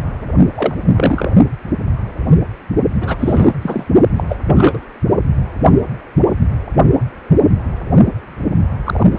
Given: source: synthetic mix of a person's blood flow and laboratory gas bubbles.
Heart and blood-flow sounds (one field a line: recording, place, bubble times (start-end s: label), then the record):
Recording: Doppler ultrasound of blood flow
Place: precordium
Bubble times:
0.54-0.75 s: bubbles
0.88-1.31 s: bubbles
3.00-3.53 s: bubbles
3.61-3.85 s: bubbles
4.16-4.24 s: bubbles
4.29-4.37 s: bubbles
4.45-4.79 s: bubbles
8.85-9.09 s: bubbles
9.16-9.19 s: bubbles
From the record:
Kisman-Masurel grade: 233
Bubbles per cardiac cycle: several, 3 to 8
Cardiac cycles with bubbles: 50 to 99%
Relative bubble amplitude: loud (0.450 to 0.775)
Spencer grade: 3 (all of the cardiac periods contain showers or single bubble signals, but not dominating or overriding the cardiac motion signals)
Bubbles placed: only in the low amplitude regions of the cardiac cycle